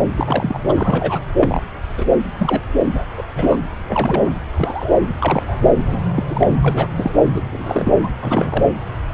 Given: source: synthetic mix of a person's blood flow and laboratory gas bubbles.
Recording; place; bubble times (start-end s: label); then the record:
Doppler ultrasound of blood flow; subclavian vein
0.16-0.58 s: bubbles
0.69-1.23 s: bubbles
1.41-1.61 s: bubbles
1.97-2.06 s: bubbles
2.38-2.62 s: bubbles
2.94-3.01 s: bubbles
3.17-3.23 s: bubbles
3.36-3.58 s: bubbles
3.89-4.36 s: bubbles
4.50-4.93 s: bubbles
5.19-5.61 s: bubbles
5.86-6.00 s: bubbles
6.16-6.23 s: bubbles
6.29-6.47 s: bubbles
6.61-6.87 s: bubbles
6.96-7.12 s: bubbles
7.34-7.43 s: bubbles
7.51-7.94 s: bubbles
7.98-8.10 s: bubbles
8.21-8.64 s: bubbles
From the record:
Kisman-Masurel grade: 242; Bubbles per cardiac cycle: several, 3 to 8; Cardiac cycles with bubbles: 100%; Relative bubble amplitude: moderate (0.250 to 0.450); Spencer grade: 3 (all of the cardiac periods contain showers or single bubble signals, but not dominating or overriding the cardiac motion signals); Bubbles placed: anywhere in the cardiac cycle